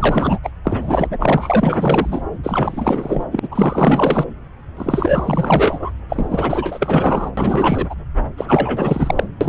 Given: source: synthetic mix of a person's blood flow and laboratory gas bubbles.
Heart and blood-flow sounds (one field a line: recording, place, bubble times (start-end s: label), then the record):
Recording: Doppler ultrasound of blood flow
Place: subclavian vein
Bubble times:
0.00-0.39 s: bubbles
0.43-0.50 s: bubbles
0.64-1.17 s: bubbles
1.19-2.22 s: bubbles
2.43-3.24 s: bubbles
3.31-3.40 s: bubbles
3.42-3.48 s: bubbles
3.51-4.26 s: bubbles
4.77-5.90 s: bubbles
6.09-7.31 s: bubbles
7.37-7.95 s: bubbles
8.37-9.24 s: bubbles
9.41-9.49 s: bubbles
From the record:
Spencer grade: 4 (maximum detectable bubble signal sounding continuously throughout systole and diastole of every cardiac period, and overriding the amplitude of the normal cardiac signals)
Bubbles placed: anywhere in the cardiac cycle